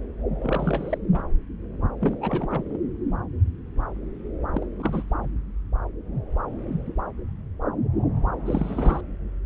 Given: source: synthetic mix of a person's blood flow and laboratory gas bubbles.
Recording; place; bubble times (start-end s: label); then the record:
Doppler ultrasound of blood flow; subclavian vein
0.39-0.98 s: bubbles
1.12-1.23 s: bubbles
2.01-2.18 s: bubbles
2.21-2.77 s: bubbles
4.55-4.66 s: bubbles
4.79-5.04 s: bubbles
8.46-9.01 s: bubbles
From the record:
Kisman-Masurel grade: 221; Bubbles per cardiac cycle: several, 3 to 8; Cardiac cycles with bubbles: 10 to 50%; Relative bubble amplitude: barely perceptible (0.100 to 0.250); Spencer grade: 2 (many but less than half of the cardiac periods contain bubble signals, singularly or in groups); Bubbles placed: anywhere in the cardiac cycle